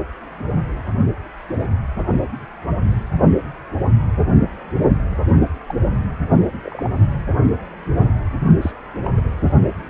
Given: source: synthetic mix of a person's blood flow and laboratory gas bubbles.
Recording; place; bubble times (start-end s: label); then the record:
Doppler ultrasound of blood flow; precordium
5.10-5.22 s: bubbles
5.67-5.75 s: bubbles
6.63-6.89 s: bubbles
8.61-8.71 s: bubbles
9.04-9.09 s: bubbles
9.17-9.21 s: bubbles
From the record:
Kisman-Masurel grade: 221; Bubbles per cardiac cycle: several, 3 to 8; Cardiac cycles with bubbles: 10 to 50%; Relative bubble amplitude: barely perceptible (0.100 to 0.250); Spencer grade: 2 (many but less than half of the cardiac periods contain bubble signals, singularly or in groups); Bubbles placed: only in the low amplitude regions of the cardiac cycle